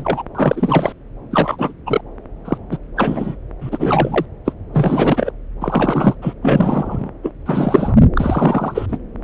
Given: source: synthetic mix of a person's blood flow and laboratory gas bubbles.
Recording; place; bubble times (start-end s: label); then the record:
Doppler ultrasound of blood flow; subclavian vein
0.00-0.22 s: bubbles
0.34-0.92 s: bubbles
1.31-1.73 s: bubbles
1.86-2.01 s: bubbles
2.45-2.58 s: bubbles
2.71-2.77 s: bubbles
2.96-3.35 s: bubbles
3.61-4.25 s: bubbles
4.45-4.52 s: bubbles
4.73-5.31 s: bubbles
5.61-6.15 s: bubbles
6.21-6.33 s: bubbles
6.42-7.09 s: bubbles
7.23-7.33 s: bubbles
7.46-7.96 s: bubbles
8.15-8.98 s: bubbles
From the record:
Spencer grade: 3 (all of the cardiac periods contain showers or single bubble signals, but not dominating or overriding the cardiac motion signals); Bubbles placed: anywhere in the cardiac cycle